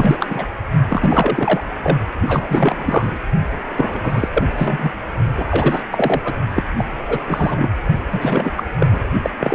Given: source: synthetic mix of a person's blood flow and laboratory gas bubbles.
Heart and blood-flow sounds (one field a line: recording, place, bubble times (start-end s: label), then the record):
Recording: Doppler ultrasound of blood flow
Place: precordium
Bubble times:
0.00-0.17 s: bubbles
0.20-0.47 s: bubbles
0.89-1.67 s: bubbles
1.83-1.98 s: bubbles
2.28-3.17 s: bubbles
3.77-4.29 s: bubbles
4.33-4.46 s: bubbles
4.53-4.92 s: bubbles
5.37-5.83 s: bubbles
5.92-6.21 s: bubbles
6.25-6.34 s: bubbles
6.53-6.64 s: bubbles
6.77-6.84 s: bubbles
7.08-7.21 s: bubbles
7.27-7.69 s: bubbles
8.11-8.51 s: bubbles
8.56-8.64 s: bubbles
8.79-9.04 s: bubbles
9.22-9.30 s: bubbles
9.39-9.55 s: bubbles
From the record:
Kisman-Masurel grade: 343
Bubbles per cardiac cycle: rolling drumbeat, 9 or more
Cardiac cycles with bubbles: 100%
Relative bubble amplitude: loud (0.450 to 0.775)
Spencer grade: 3 (all of the cardiac periods contain showers or single bubble signals, but not dominating or overriding the cardiac motion signals)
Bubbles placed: only in the low amplitude regions of the cardiac cycle